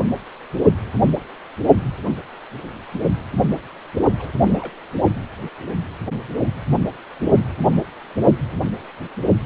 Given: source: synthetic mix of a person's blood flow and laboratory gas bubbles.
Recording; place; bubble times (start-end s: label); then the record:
Doppler ultrasound of blood flow; precordium
4.18-4.29 s: bubbles
4.42-4.73 s: bubbles
From the record:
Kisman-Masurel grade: 211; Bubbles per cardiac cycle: several, 3 to 8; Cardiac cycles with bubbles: 1 to 10%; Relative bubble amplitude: barely perceptible (0.100 to 0.250); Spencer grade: 1 (occasional bubble signal discernible with the cardiac motion signal, with majority of cardiac periods free of bubbles); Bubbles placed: only in the low amplitude regions of the cardiac cycle